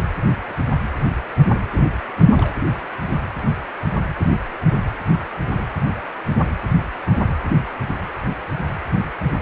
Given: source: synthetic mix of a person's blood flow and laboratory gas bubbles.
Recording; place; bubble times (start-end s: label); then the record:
Doppler ultrasound of blood flow; precordium
1.77-1.85 s: bubbles
2.38-2.54 s: bubbles
From the record:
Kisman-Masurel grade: 111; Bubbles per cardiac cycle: 1 to 2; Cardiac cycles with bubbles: 1 to 10%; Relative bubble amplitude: barely perceptible (0.100 to 0.250); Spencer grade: 1 (occasional bubble signal discernible with the cardiac motion signal, with majority of cardiac periods free of bubbles); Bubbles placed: anywhere in the cardiac cycle